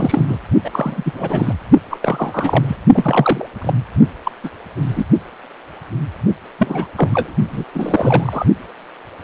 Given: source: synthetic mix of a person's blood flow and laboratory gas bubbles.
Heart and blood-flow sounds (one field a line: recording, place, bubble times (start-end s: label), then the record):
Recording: Doppler ultrasound of blood flow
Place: precordium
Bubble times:
0.00-0.25 s: bubbles
0.28-0.37 s: bubbles
0.64-0.70 s: bubbles
0.73-1.54 s: bubbles
1.90-1.97 s: bubbles
2.00-2.76 s: bubbles
2.93-3.49 s: bubbles
3.61-3.73 s: bubbles
4.25-4.31 s: bubbles
4.43-4.50 s: bubbles
4.82-5.05 s: bubbles
6.58-6.93 s: bubbles
6.96-7.34 s: bubbles
7.52-7.65 s: bubbles
7.72-8.46 s: bubbles
From the record:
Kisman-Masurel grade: 333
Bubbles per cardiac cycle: rolling drumbeat, 9 or more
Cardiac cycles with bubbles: 50 to 99%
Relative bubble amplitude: loud (0.450 to 0.775)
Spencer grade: 3 (all of the cardiac periods contain showers or single bubble signals, but not dominating or overriding the cardiac motion signals)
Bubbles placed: only in the low amplitude regions of the cardiac cycle